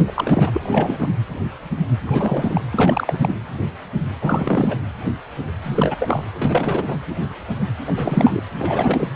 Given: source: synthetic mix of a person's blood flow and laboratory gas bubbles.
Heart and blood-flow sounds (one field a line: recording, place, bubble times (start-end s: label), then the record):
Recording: Doppler ultrasound of blood flow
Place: precordium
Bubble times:
0.08-0.13 s: bubbles
0.16-1.09 s: bubbles
2.07-2.61 s: bubbles
2.71-3.33 s: bubbles
4.21-4.78 s: bubbles
5.62-5.97 s: bubbles
5.99-6.26 s: bubbles
6.34-6.99 s: bubbles
7.87-8.40 s: bubbles
8.58-9.07 s: bubbles
From the record:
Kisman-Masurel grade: 332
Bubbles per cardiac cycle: rolling drumbeat, 9 or more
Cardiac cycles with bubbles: 50 to 99%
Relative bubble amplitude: moderate (0.250 to 0.450)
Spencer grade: 3 (all of the cardiac periods contain showers or single bubble signals, but not dominating or overriding the cardiac motion signals)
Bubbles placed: anywhere in the cardiac cycle